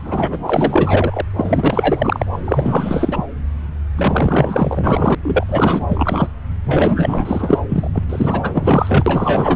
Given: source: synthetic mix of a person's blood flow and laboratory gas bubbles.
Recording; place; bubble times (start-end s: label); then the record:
Doppler ultrasound of blood flow; subclavian vein
0.04-1.21 s: bubbles
1.36-2.26 s: bubbles
2.32-2.38 s: bubbles
2.45-3.25 s: bubbles
3.96-5.15 s: bubbles
5.22-5.45 s: bubbles
5.48-6.28 s: bubbles
6.65-7.59 s: bubbles
7.68-7.89 s: bubbles
7.92-8.04 s: bubbles
8.09-9.56 s: bubbles
From the record:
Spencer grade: 4 (maximum detectable bubble signal sounding continuously throughout systole and diastole of every cardiac period, and overriding the amplitude of the normal cardiac signals); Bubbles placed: anywhere in the cardiac cycle